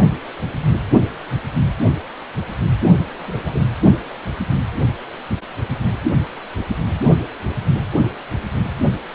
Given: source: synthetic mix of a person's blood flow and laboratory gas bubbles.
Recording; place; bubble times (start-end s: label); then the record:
Doppler ultrasound of blood flow; precordium
3.17-3.65 s: bubbles
From the record:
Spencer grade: 1 (occasional bubble signal discernible with the cardiac motion signal, with majority of cardiac periods free of bubbles); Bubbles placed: only in the low amplitude regions of the cardiac cycle